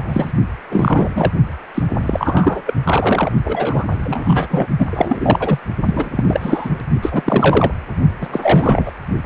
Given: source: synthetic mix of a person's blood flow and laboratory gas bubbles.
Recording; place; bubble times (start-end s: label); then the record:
Doppler ultrasound of blood flow; precordium
0.00-0.32 s: bubbles
0.71-1.31 s: bubbles
1.74-1.83 s: bubbles
2.00-2.62 s: bubbles
2.66-2.74 s: bubbles
2.84-3.32 s: bubbles
3.44-3.85 s: bubbles
3.90-4.68 s: bubbles
4.78-4.87 s: bubbles
4.90-5.59 s: bubbles
5.85-6.24 s: bubbles
6.27-6.70 s: bubbles
7.01-7.22 s: bubbles
7.25-7.71 s: bubbles
8.21-8.27 s: bubbles
8.32-8.92 s: bubbles
From the record:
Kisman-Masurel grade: 333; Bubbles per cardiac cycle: rolling drumbeat, 9 or more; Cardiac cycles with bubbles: 50 to 99%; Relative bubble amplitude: loud (0.450 to 0.775); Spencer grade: 3 (all of the cardiac periods contain showers or single bubble signals, but not dominating or overriding the cardiac motion signals); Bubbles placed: only in the low amplitude regions of the cardiac cycle